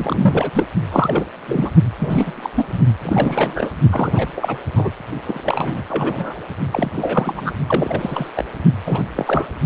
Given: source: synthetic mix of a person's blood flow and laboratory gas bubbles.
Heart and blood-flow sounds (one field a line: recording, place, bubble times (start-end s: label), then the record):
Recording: Doppler ultrasound of blood flow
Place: precordium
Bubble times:
0.00-0.51 s: bubbles
0.55-0.65 s: bubbles
0.91-1.24 s: bubbles
1.46-1.70 s: bubbles
1.99-2.50 s: bubbles
2.56-2.65 s: bubbles
2.68-2.79 s: bubbles
3.02-3.71 s: bubbles
3.91-4.27 s: bubbles
4.36-4.58 s: bubbles
4.71-4.91 s: bubbles
5.25-5.41 s: bubbles
5.45-5.83 s: bubbles
5.89-6.33 s: bubbles
6.71-6.91 s: bubbles
6.96-7.52 s: bubbles
7.69-8.29 s: bubbles
8.36-8.44 s: bubbles
8.84-9.02 s: bubbles
9.17-9.48 s: bubbles
From the record:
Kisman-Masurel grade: 342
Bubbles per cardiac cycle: rolling drumbeat, 9 or more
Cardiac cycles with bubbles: 100%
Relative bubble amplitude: moderate (0.250 to 0.450)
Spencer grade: 3 (all of the cardiac periods contain showers or single bubble signals, but not dominating or overriding the cardiac motion signals)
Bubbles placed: only in the low amplitude regions of the cardiac cycle